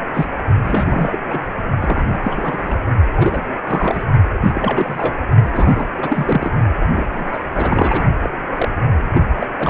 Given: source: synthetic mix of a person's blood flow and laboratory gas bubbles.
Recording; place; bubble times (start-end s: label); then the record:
Doppler ultrasound of blood flow; precordium
0.14-0.28 s: bubbles
0.64-1.19 s: bubbles
1.30-1.39 s: bubbles
1.81-2.19 s: bubbles
2.24-2.78 s: bubbles
3.12-3.42 s: bubbles
3.67-4.04 s: bubbles
4.44-5.13 s: bubbles
5.43-5.86 s: bubbles
5.97-6.52 s: bubbles
6.87-7.06 s: bubbles
7.13-8.04 s: bubbles
8.23-8.29 s: bubbles
8.56-8.68 s: bubbles
9.09-9.23 s: bubbles
9.39-9.47 s: bubbles
9.58-9.70 s: bubbles
From the record:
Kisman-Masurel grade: 342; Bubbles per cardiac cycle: rolling drumbeat, 9 or more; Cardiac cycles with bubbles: 100%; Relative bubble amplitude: moderate (0.250 to 0.450); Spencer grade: 3 (all of the cardiac periods contain showers or single bubble signals, but not dominating or overriding the cardiac motion signals); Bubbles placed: only in the low amplitude regions of the cardiac cycle